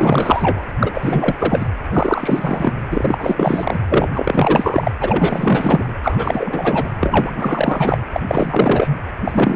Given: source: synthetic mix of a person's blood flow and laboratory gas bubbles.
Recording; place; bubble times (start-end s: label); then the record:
Doppler ultrasound of blood flow; precordium
0.00-0.62 s: bubbles
0.79-0.91 s: bubbles
0.94-1.69 s: bubbles
1.90-2.73 s: bubbles
2.90-3.79 s: bubbles
3.89-4.08 s: bubbles
4.12-4.92 s: bubbles
5.01-5.93 s: bubbles
6.03-6.90 s: bubbles
7.00-7.98 s: bubbles
8.12-8.21 s: bubbles
8.27-8.97 s: bubbles
9.24-9.56 s: bubbles
From the record:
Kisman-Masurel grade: 444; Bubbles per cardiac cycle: continuous sound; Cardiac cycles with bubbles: 100%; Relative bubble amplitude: maximal (0.775 to 0.999); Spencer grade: 4 (maximum detectable bubble signal sounding continuously throughout systole and diastole of every cardiac period, and overriding the amplitude of the normal cardiac signals); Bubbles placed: anywhere in the cardiac cycle